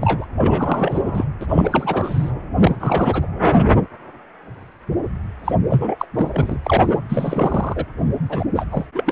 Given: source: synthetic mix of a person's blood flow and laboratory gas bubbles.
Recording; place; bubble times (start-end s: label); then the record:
Doppler ultrasound of blood flow; precordium
0.00-0.27 s: bubbles
0.38-1.25 s: bubbles
1.41-2.31 s: bubbles
2.58-2.76 s: bubbles
2.79-3.28 s: bubbles
5.44-5.53 s: bubbles
5.70-5.96 s: bubbles
5.99-6.05 s: bubbles
6.15-6.58 s: bubbles
6.63-7.02 s: bubbles
7.09-7.85 s: bubbles
8.29-8.45 s: bubbles
8.55-8.65 s: bubbles
8.70-8.86 s: bubbles
8.95-9.12 s: bubbles
From the record:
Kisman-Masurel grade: 333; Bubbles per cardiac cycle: rolling drumbeat, 9 or more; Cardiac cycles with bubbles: 50 to 99%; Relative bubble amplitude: loud (0.450 to 0.775); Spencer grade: 3 (all of the cardiac periods contain showers or single bubble signals, but not dominating or overriding the cardiac motion signals); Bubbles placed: anywhere in the cardiac cycle